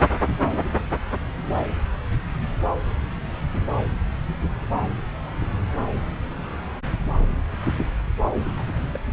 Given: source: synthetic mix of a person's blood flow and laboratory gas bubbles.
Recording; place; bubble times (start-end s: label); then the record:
Doppler ultrasound of blood flow; subclavian vein
8.57-8.82 s: bubbles
8.93-9.00 s: bubbles
From the record:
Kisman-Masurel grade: 111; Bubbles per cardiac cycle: 1 to 2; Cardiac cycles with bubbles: 1 to 10%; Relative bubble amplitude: barely perceptible (0.100 to 0.250); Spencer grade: 1 (occasional bubble signal discernible with the cardiac motion signal, with majority of cardiac periods free of bubbles); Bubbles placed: anywhere in the cardiac cycle